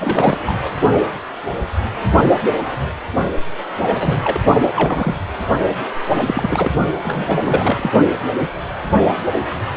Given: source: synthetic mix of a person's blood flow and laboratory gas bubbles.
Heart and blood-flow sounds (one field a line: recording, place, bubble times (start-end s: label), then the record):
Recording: Doppler ultrasound of blood flow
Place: precordium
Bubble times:
0.00-0.38 s: bubbles
0.47-0.57 s: bubbles
3.82-4.41 s: bubbles
4.62-4.68 s: bubbles
4.75-5.17 s: bubbles
6.24-6.72 s: bubbles
7.03-7.90 s: bubbles
From the record:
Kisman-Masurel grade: 222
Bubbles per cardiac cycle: several, 3 to 8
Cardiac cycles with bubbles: 10 to 50%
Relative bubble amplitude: moderate (0.250 to 0.450)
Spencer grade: 2 (many but less than half of the cardiac periods contain bubble signals, singularly or in groups)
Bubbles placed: only in the low amplitude regions of the cardiac cycle